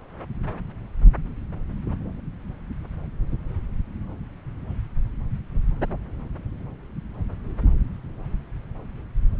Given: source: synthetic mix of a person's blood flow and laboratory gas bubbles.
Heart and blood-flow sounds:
Doppler ultrasound of blood flow; subclavian vein
no bubbles
From the record:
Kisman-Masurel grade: 000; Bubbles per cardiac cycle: 0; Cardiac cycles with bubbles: 0%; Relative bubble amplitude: no bubbles discernible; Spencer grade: 0 (complete lack of bubble signals)

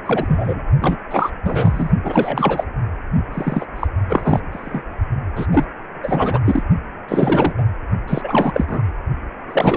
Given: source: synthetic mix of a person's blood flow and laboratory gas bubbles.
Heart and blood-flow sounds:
Doppler ultrasound of blood flow; precordium
0.04-0.61 s: bubbles
0.81-0.96 s: bubbles
1.10-1.32 s: bubbles
1.44-1.91 s: bubbles
2.04-2.65 s: bubbles
3.31-3.65 s: bubbles
3.76-3.87 s: bubbles
4.09-4.39 s: bubbles
4.50-4.83 s: bubbles
5.35-5.47 s: bubbles
5.51-5.65 s: bubbles
6.03-6.39 s: bubbles
6.45-6.62 s: bubbles
7.08-7.54 s: bubbles
7.58-7.63 s: bubbles
8.07-8.83 s: bubbles
9.49-9.77 s: bubbles
From the record:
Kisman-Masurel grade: 343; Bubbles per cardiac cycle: rolling drumbeat, 9 or more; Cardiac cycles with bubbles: 100%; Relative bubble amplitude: loud (0.450 to 0.775); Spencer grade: 3 (all of the cardiac periods contain showers or single bubble signals, but not dominating or overriding the cardiac motion signals); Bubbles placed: only in the low amplitude regions of the cardiac cycle

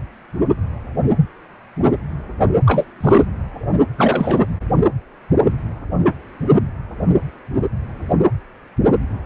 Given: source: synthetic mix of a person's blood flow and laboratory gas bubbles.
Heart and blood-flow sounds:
Doppler ultrasound of blood flow; precordium
2.66-2.84 s: bubbles
3.00-3.25 s: bubbles
3.97-4.46 s: bubbles
From the record:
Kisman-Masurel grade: 213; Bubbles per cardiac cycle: several, 3 to 8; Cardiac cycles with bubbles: 1 to 10%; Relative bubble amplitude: loud (0.450 to 0.775); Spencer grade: 1 (occasional bubble signal discernible with the cardiac motion signal, with majority of cardiac periods free of bubbles); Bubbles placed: anywhere in the cardiac cycle

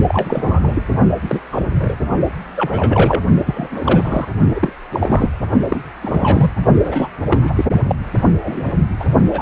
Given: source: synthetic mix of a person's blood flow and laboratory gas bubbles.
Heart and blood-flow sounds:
Doppler ultrasound of blood flow; precordium
0.08-0.83 s: bubbles
1.22-1.41 s: bubbles
1.51-1.96 s: bubbles
2.56-3.23 s: bubbles
3.46-3.68 s: bubbles
3.71-4.28 s: bubbles
4.54-4.74 s: bubbles
4.92-5.29 s: bubbles
5.70-5.80 s: bubbles
6.01-6.51 s: bubbles
6.84-7.09 s: bubbles
7.30-7.65 s: bubbles
7.83-7.95 s: bubbles
8.38-8.67 s: bubbles
9.00-9.09 s: bubbles
9.30-9.42 s: bubbles
From the record:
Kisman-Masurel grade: 243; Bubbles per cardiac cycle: several, 3 to 8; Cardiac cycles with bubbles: 100%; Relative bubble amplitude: loud (0.450 to 0.775); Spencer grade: 3 (all of the cardiac periods contain showers or single bubble signals, but not dominating or overriding the cardiac motion signals); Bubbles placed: only in the low amplitude regions of the cardiac cycle

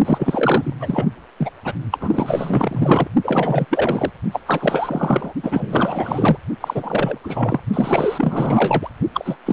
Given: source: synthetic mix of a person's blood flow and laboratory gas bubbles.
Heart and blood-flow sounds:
Doppler ultrasound of blood flow; precordium
0.04-0.75 s: bubbles
0.80-1.06 s: bubbles
1.37-1.50 s: bubbles
1.64-1.73 s: bubbles
1.91-3.08 s: bubbles
3.23-3.65 s: bubbles
3.70-4.11 s: bubbles
4.32-4.40 s: bubbles
4.46-5.33 s: bubbles
5.43-6.38 s: bubbles
6.61-7.18 s: bubbles
7.24-7.60 s: bubbles
7.74-8.88 s: bubbles
9.13-9.37 s: bubbles
9.45-9.53 s: bubbles
From the record:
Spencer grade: 4 (maximum detectable bubble signal sounding continuously throughout systole and diastole of every cardiac period, and overriding the amplitude of the normal cardiac signals); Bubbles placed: only in the low amplitude regions of the cardiac cycle

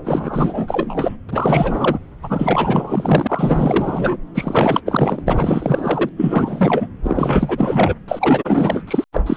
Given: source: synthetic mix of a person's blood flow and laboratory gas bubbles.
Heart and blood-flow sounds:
Doppler ultrasound of blood flow; subclavian vein
0.04-1.17 s: bubbles
1.28-1.98 s: bubbles
2.22-4.17 s: bubbles
4.34-4.80 s: bubbles
4.85-5.22 s: bubbles
5.27-6.09 s: bubbles
6.17-6.88 s: bubbles
7.03-7.95 s: bubbles
8.07-8.83 s: bubbles
8.87-9.04 s: bubbles
9.12-9.21 s: bubbles
9.26-9.37 s: bubbles
From the record:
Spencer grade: 4 (maximum detectable bubble signal sounding continuously throughout systole and diastole of every cardiac period, and overriding the amplitude of the normal cardiac signals); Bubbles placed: anywhere in the cardiac cycle

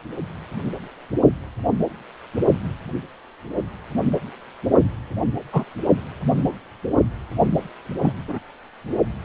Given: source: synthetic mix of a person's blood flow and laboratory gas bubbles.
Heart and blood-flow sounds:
Doppler ultrasound of blood flow; precordium
5.52-5.64 s: bubbles
8.01-8.12 s: bubbles
8.27-8.39 s: bubbles
From the record:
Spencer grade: 2 (many but less than half of the cardiac periods contain bubble signals, singularly or in groups); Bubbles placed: only in the low amplitude regions of the cardiac cycle

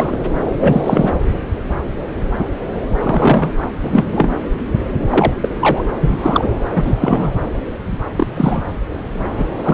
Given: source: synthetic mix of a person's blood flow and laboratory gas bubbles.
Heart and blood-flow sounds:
Doppler ultrasound of blood flow; subclavian vein
0.00-0.16 s: bubbles
0.55-1.14 s: bubbles
3.03-3.52 s: bubbles
3.83-4.33 s: bubbles
5.09-5.33 s: bubbles
5.42-5.49 s: bubbles
5.59-5.86 s: bubbles
6.01-6.48 s: bubbles
6.71-6.96 s: bubbles
7.00-7.33 s: bubbles
8.17-8.28 s: bubbles
8.35-8.64 s: bubbles
9.39-9.45 s: bubbles
9.63-9.74 s: bubbles
From the record:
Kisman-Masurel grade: 233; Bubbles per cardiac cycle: several, 3 to 8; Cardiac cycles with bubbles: 50 to 99%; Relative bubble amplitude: loud (0.450 to 0.775); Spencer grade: 3 (all of the cardiac periods contain showers or single bubble signals, but not dominating or overriding the cardiac motion signals); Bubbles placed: anywhere in the cardiac cycle

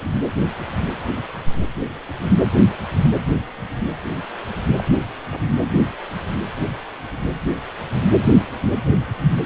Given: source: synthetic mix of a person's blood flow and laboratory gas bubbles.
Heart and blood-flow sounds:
Doppler ultrasound of blood flow; precordium
4.77-4.92 s: bubbles
From the record:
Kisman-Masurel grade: 111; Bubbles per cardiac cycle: 1 to 2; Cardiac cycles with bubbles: 1 to 10%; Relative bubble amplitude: barely perceptible (0.100 to 0.250); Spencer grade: 1 (occasional bubble signal discernible with the cardiac motion signal, with majority of cardiac periods free of bubbles); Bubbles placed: anywhere in the cardiac cycle

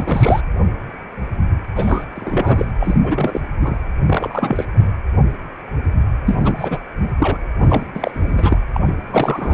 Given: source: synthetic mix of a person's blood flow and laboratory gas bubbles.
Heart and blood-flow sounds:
Doppler ultrasound of blood flow; precordium
0.00-0.41 s: bubbles
1.76-2.05 s: bubbles
2.16-2.66 s: bubbles
2.79-3.00 s: bubbles
3.03-3.41 s: bubbles
3.60-3.77 s: bubbles
4.05-4.65 s: bubbles
4.73-4.92 s: bubbles
6.26-6.78 s: bubbles
6.98-7.09 s: bubbles
7.18-7.38 s: bubbles
7.60-7.86 s: bubbles
7.95-8.61 s: bubbles
8.73-8.80 s: bubbles
8.87-8.95 s: bubbles
9.12-9.54 s: bubbles
From the record:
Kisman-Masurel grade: 332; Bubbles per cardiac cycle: rolling drumbeat, 9 or more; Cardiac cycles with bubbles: 50 to 99%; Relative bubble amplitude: moderate (0.250 to 0.450); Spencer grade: 3 (all of the cardiac periods contain showers or single bubble signals, but not dominating or overriding the cardiac motion signals); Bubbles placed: anywhere in the cardiac cycle

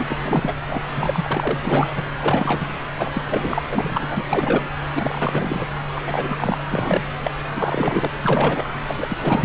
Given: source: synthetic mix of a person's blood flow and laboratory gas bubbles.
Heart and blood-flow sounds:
Doppler ultrasound of blood flow; subclavian vein
0.00-0.05 s: bubbles
0.10-0.15 s: bubbles
0.24-0.54 s: bubbles
0.68-0.83 s: bubbles
0.96-2.04 s: bubbles
2.19-2.67 s: bubbles
2.95-3.10 s: bubbles
3.13-3.23 s: bubbles
3.27-3.62 s: bubbles
3.71-4.06 s: bubbles
4.09-4.24 s: bubbles
4.32-4.68 s: bubbles
4.94-5.66 s: bubbles
5.94-6.01 s: bubbles
6.06-6.57 s: bubbles
6.69-7.02 s: bubbles
7.23-7.30 s: bubbles
7.56-8.11 s: bubbles
8.22-8.68 s: bubbles
8.87-8.95 s: bubbles
8.97-9.45 s: bubbles
From the record:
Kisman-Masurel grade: 342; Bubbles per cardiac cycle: rolling drumbeat, 9 or more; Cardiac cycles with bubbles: 100%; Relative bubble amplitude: moderate (0.250 to 0.450); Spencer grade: 3 (all of the cardiac periods contain showers or single bubble signals, but not dominating or overriding the cardiac motion signals); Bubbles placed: anywhere in the cardiac cycle

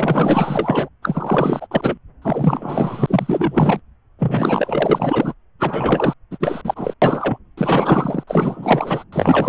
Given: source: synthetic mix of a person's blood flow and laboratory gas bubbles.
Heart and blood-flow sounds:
Doppler ultrasound of blood flow; subclavian vein
0.00-0.89 s: bubbles
1.02-1.67 s: bubbles
1.71-1.98 s: bubbles
2.21-3.81 s: bubbles
4.19-5.34 s: bubbles
5.59-6.13 s: bubbles
6.31-6.38 s: bubbles
6.40-6.62 s: bubbles
6.64-6.94 s: bubbles
7.02-7.38 s: bubbles
7.57-8.23 s: bubbles
8.27-9.04 s: bubbles
9.12-9.48 s: bubbles
From the record:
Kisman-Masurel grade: 444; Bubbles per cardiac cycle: continuous sound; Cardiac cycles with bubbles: 100%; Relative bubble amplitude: maximal (0.775 to 0.999); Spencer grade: 4 (maximum detectable bubble signal sounding continuously throughout systole and diastole of every cardiac period, and overriding the amplitude of the normal cardiac signals); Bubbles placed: anywhere in the cardiac cycle

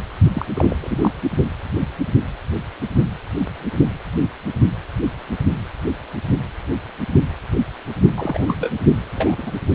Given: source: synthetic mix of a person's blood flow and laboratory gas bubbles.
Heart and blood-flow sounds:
Doppler ultrasound of blood flow; precordium
0.35-0.46 s: bubbles
0.53-0.76 s: bubbles
0.81-1.11 s: bubbles
8.17-8.56 s: bubbles
8.60-8.72 s: bubbles
9.16-9.35 s: bubbles
9.38-9.52 s: bubbles
From the record:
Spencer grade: 2 (many but less than half of the cardiac periods contain bubble signals, singularly or in groups); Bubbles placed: only in the low amplitude regions of the cardiac cycle

